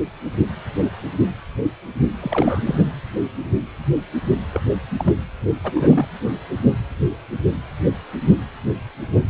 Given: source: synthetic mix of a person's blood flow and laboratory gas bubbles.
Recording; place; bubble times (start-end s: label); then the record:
Doppler ultrasound of blood flow; precordium
2.21-2.62 s: bubbles
2.65-2.75 s: bubbles
4.52-4.61 s: bubbles
4.99-5.15 s: bubbles
5.64-5.72 s: bubbles
5.75-6.08 s: bubbles
From the record:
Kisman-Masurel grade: 222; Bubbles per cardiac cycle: several, 3 to 8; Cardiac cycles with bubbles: 10 to 50%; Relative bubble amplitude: moderate (0.250 to 0.450); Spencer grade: 2 (many but less than half of the cardiac periods contain bubble signals, singularly or in groups); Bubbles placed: anywhere in the cardiac cycle